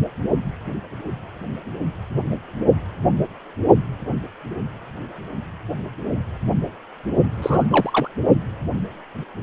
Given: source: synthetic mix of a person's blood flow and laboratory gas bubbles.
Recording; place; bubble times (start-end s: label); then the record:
Doppler ultrasound of blood flow; precordium
7.31-7.66 s: bubbles
7.70-8.08 s: bubbles
From the record:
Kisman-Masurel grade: 222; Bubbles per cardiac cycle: several, 3 to 8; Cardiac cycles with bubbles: 10 to 50%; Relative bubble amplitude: moderate (0.250 to 0.450); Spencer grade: 2 (many but less than half of the cardiac periods contain bubble signals, singularly or in groups); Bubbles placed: only in the low amplitude regions of the cardiac cycle